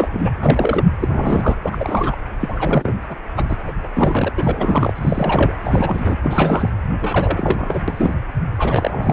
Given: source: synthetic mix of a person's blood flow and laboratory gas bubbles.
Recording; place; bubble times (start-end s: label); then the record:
Doppler ultrasound of blood flow; precordium
0.00-0.30 s: bubbles
0.40-0.84 s: bubbles
0.99-1.56 s: bubbles
1.63-2.16 s: bubbles
2.40-2.94 s: bubbles
3.08-3.16 s: bubbles
3.36-3.45 s: bubbles
3.48-3.57 s: bubbles
3.65-3.72 s: bubbles
3.83-3.89 s: bubbles
3.94-4.33 s: bubbles
4.38-4.93 s: bubbles
4.96-5.52 s: bubbles
5.64-6.17 s: bubbles
6.23-6.72 s: bubbles
7.01-7.81 s: bubbles
7.88-8.16 s: bubbles
8.58-9.13 s: bubbles
From the record:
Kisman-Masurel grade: 343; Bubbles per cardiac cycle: rolling drumbeat, 9 or more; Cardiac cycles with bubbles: 100%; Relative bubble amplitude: loud (0.450 to 0.775); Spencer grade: 3 (all of the cardiac periods contain showers or single bubble signals, but not dominating or overriding the cardiac motion signals); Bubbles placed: anywhere in the cardiac cycle